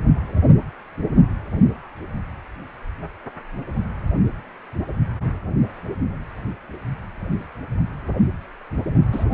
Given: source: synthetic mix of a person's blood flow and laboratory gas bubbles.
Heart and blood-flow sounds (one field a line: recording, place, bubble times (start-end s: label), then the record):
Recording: Doppler ultrasound of blood flow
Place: precordium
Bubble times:
9.12-9.25 s: bubbles
From the record:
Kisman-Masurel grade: 112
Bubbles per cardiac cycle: 1 to 2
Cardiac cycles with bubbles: 1 to 10%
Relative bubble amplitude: moderate (0.250 to 0.450)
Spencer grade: 1 (occasional bubble signal discernible with the cardiac motion signal, with majority of cardiac periods free of bubbles)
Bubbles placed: only in the low amplitude regions of the cardiac cycle